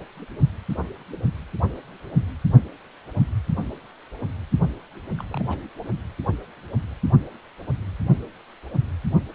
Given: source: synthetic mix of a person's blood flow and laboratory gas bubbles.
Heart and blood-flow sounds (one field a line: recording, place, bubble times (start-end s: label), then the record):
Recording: Doppler ultrasound of blood flow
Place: precordium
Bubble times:
5.18-5.24 s: bubbles
5.29-5.58 s: bubbles
From the record:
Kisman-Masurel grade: 211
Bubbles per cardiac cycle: several, 3 to 8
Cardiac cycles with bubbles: 1 to 10%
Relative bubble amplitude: barely perceptible (0.100 to 0.250)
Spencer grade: 1 (occasional bubble signal discernible with the cardiac motion signal, with majority of cardiac periods free of bubbles)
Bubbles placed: only in the low amplitude regions of the cardiac cycle